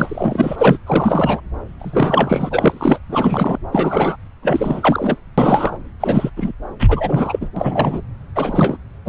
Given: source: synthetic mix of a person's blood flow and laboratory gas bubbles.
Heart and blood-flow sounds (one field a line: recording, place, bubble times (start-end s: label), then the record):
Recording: Doppler ultrasound of blood flow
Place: subclavian vein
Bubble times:
0.00-0.78 s: bubbles
0.86-1.41 s: bubbles
1.78-2.98 s: bubbles
3.09-3.58 s: bubbles
3.72-4.16 s: bubbles
4.42-5.17 s: bubbles
5.38-5.77 s: bubbles
6.00-6.30 s: bubbles
6.37-6.52 s: bubbles
6.79-7.49 s: bubbles
7.56-8.02 s: bubbles
8.35-8.77 s: bubbles
9.05-9.09 s: bubbles
From the record:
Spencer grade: 3 (all of the cardiac periods contain showers or single bubble signals, but not dominating or overriding the cardiac motion signals)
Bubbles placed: anywhere in the cardiac cycle